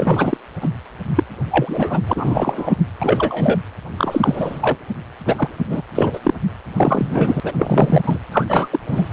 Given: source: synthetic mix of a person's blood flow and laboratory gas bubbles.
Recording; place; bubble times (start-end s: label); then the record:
Doppler ultrasound of blood flow; precordium
0.00-0.37 s: bubbles
0.60-0.69 s: bubbles
1.15-1.23 s: bubbles
1.50-2.75 s: bubbles
3.01-3.60 s: bubbles
3.98-4.75 s: bubbles
5.25-5.49 s: bubbles
5.69-5.82 s: bubbles
5.95-6.20 s: bubbles
6.24-6.34 s: bubbles
6.77-7.40 s: bubbles
7.44-7.52 s: bubbles
7.58-8.18 s: bubbles
8.32-8.45 s: bubbles
8.47-8.68 s: bubbles
8.71-8.79 s: bubbles
8.86-9.07 s: bubbles
From the record:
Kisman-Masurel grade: 343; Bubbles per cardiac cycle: rolling drumbeat, 9 or more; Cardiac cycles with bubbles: 100%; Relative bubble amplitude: loud (0.450 to 0.775); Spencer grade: 3 (all of the cardiac periods contain showers or single bubble signals, but not dominating or overriding the cardiac motion signals); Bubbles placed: anywhere in the cardiac cycle